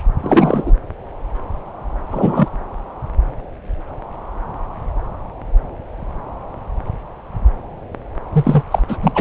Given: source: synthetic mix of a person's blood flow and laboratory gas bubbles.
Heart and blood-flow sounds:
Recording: Doppler ultrasound of blood flow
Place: subclavian vein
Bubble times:
0.22-0.74 s: bubbles
2.10-2.49 s: bubbles
8.32-8.63 s: bubbles
8.70-8.82 s: bubbles
8.88-8.97 s: bubbles
9.02-9.12 s: bubbles
9.14-9.21 s: bubbles
From the record:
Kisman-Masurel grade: 223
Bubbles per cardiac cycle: several, 3 to 8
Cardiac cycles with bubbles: 10 to 50%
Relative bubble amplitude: loud (0.450 to 0.775)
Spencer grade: 2 (many but less than half of the cardiac periods contain bubble signals, singularly or in groups)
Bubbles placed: anywhere in the cardiac cycle

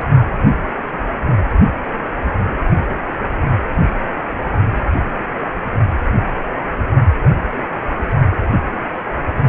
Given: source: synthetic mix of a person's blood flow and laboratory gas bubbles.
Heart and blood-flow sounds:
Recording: Doppler ultrasound of blood flow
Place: precordium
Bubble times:
0.00-0.02 s: bubbles
From the record:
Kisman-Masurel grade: 213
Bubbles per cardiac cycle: several, 3 to 8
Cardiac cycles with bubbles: 1 to 10%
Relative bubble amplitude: loud (0.450 to 0.775)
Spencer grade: 1 (occasional bubble signal discernible with the cardiac motion signal, with majority of cardiac periods free of bubbles)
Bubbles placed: only in the low amplitude regions of the cardiac cycle

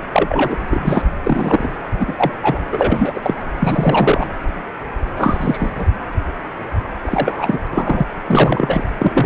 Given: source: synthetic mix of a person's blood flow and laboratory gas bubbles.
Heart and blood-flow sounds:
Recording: Doppler ultrasound of blood flow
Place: precordium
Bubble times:
0.12-0.57 s: bubbles
0.67-1.15 s: bubbles
1.23-1.70 s: bubbles
1.92-2.31 s: bubbles
2.43-2.60 s: bubbles
2.72-3.21 s: bubbles
3.24-3.35 s: bubbles
3.60-4.26 s: bubbles
5.17-5.70 s: bubbles
5.75-5.84 s: bubbles
7.01-7.59 s: bubbles
7.73-8.07 s: bubbles
8.28-8.84 s: bubbles
8.98-9.26 s: bubbles
From the record:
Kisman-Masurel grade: 233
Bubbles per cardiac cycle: several, 3 to 8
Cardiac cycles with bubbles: 50 to 99%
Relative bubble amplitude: loud (0.450 to 0.775)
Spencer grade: 3 (all of the cardiac periods contain showers or single bubble signals, but not dominating or overriding the cardiac motion signals)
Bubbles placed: anywhere in the cardiac cycle

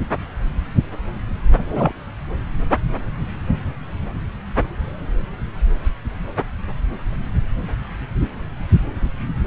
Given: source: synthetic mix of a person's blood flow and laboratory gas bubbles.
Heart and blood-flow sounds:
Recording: Doppler ultrasound of blood flow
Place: subclavian vein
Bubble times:
1.57-1.93 s: bubbles
From the record:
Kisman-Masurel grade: 113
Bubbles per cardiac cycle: 1 to 2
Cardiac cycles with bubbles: 1 to 10%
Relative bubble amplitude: loud (0.450 to 0.775)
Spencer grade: 1 (occasional bubble signal discernible with the cardiac motion signal, with majority of cardiac periods free of bubbles)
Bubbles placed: anywhere in the cardiac cycle

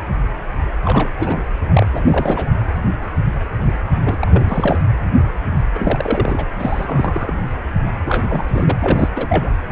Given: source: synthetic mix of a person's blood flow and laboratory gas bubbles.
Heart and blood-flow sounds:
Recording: Doppler ultrasound of blood flow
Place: precordium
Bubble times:
0.84-1.10 s: bubbles
1.18-1.41 s: bubbles
1.73-1.89 s: bubbles
1.92-2.01 s: bubbles
2.04-2.50 s: bubbles
4.01-4.17 s: bubbles
4.21-4.79 s: bubbles
5.75-6.46 s: bubbles
6.58-7.33 s: bubbles
8.05-8.44 s: bubbles
8.47-8.76 s: bubbles
8.79-9.09 s: bubbles
9.15-9.50 s: bubbles
From the record:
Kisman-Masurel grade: 332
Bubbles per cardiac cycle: rolling drumbeat, 9 or more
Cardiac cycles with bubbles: 50 to 99%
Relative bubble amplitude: moderate (0.250 to 0.450)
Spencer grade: 3 (all of the cardiac periods contain showers or single bubble signals, but not dominating or overriding the cardiac motion signals)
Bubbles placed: anywhere in the cardiac cycle

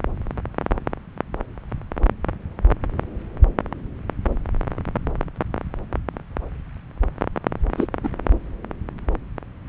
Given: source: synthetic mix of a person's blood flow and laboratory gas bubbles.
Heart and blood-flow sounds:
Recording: Doppler ultrasound of blood flow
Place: subclavian vein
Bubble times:
7.78-7.87 s: bubbles
8.04-8.09 s: bubbles
From the record:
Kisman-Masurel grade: 213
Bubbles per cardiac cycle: several, 3 to 8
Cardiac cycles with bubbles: 1 to 10%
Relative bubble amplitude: loud (0.450 to 0.775)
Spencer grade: 1 (occasional bubble signal discernible with the cardiac motion signal, with majority of cardiac periods free of bubbles)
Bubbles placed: anywhere in the cardiac cycle

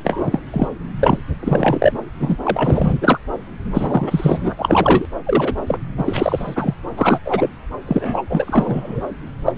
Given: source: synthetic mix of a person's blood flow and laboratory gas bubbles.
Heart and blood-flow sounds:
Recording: Doppler ultrasound of blood flow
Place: subclavian vein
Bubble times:
0.04-0.40 s: bubbles
0.52-0.68 s: bubbles
0.99-1.19 s: bubbles
1.42-1.92 s: bubbles
2.19-2.37 s: bubbles
2.43-2.92 s: bubbles
3.01-3.19 s: bubbles
3.74-4.55 s: bubbles
4.59-5.06 s: bubbles
5.25-5.53 s: bubbles
5.67-5.78 s: bubbles
5.97-6.74 s: bubbles
6.96-7.19 s: bubbles
7.25-7.50 s: bubbles
7.87-8.22 s: bubbles
8.29-9.04 s: bubbles
9.46-9.53 s: bubbles
From the record:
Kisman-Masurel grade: 343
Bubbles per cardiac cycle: rolling drumbeat, 9 or more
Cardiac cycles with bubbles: 100%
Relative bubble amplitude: loud (0.450 to 0.775)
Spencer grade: 3 (all of the cardiac periods contain showers or single bubble signals, but not dominating or overriding the cardiac motion signals)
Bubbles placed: anywhere in the cardiac cycle

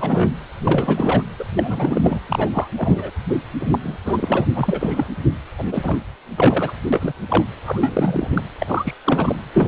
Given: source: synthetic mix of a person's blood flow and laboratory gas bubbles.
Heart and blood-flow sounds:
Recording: Doppler ultrasound of blood flow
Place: precordium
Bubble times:
0.00-0.33 s: bubbles
0.64-1.23 s: bubbles
1.39-1.45 s: bubbles
1.56-2.21 s: bubbles
2.29-2.50 s: bubbles
2.53-2.69 s: bubbles
2.76-3.10 s: bubbles
3.60-3.79 s: bubbles
3.83-3.97 s: bubbles
4.05-4.46 s: bubbles
4.54-5.08 s: bubbles
5.58-5.64 s: bubbles
5.71-6.01 s: bubbles
6.37-6.71 s: bubbles
6.92-7.13 s: bubbles
7.29-7.44 s: bubbles
7.66-8.43 s: bubbles
8.59-8.94 s: bubbles
9.04-9.40 s: bubbles
9.53-9.68 s: bubbles
From the record:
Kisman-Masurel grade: 342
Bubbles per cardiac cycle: rolling drumbeat, 9 or more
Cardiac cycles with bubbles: 100%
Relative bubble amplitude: moderate (0.250 to 0.450)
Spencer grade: 3 (all of the cardiac periods contain showers or single bubble signals, but not dominating or overriding the cardiac motion signals)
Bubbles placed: anywhere in the cardiac cycle

